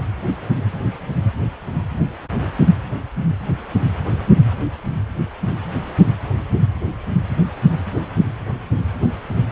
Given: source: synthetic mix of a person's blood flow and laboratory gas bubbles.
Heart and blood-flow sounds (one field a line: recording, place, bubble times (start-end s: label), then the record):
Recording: Doppler ultrasound of blood flow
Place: precordium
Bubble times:
0.27-0.35 s: bubbles
From the record:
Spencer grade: 2 (many but less than half of the cardiac periods contain bubble signals, singularly or in groups)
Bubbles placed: anywhere in the cardiac cycle